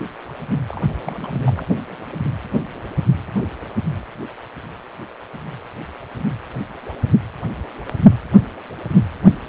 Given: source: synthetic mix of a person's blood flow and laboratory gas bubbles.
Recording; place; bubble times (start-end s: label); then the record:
Doppler ultrasound of blood flow; precordium
0.69-0.83 s: bubbles
1.05-1.65 s: bubbles
From the record:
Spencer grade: 1 (occasional bubble signal discernible with the cardiac motion signal, with majority of cardiac periods free of bubbles); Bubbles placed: anywhere in the cardiac cycle